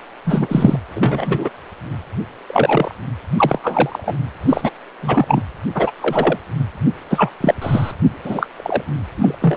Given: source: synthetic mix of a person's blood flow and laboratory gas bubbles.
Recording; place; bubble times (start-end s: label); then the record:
Doppler ultrasound of blood flow; precordium
0.24-0.79 s: bubbles
0.91-0.93 s: bubbles
0.95-1.50 s: bubbles
2.48-2.95 s: bubbles
3.37-3.59 s: bubbles
3.62-4.15 s: bubbles
4.49-4.71 s: bubbles
5.00-5.44 s: bubbles
5.74-5.92 s: bubbles
6.00-6.38 s: bubbles
7.10-7.31 s: bubbles
7.41-7.54 s: bubbles
7.62-7.92 s: bubbles
8.24-8.46 s: bubbles
8.57-8.82 s: bubbles
9.16-9.37 s: bubbles
9.41-9.57 s: bubbles
From the record:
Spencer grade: 3 (all of the cardiac periods contain showers or single bubble signals, but not dominating or overriding the cardiac motion signals); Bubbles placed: anywhere in the cardiac cycle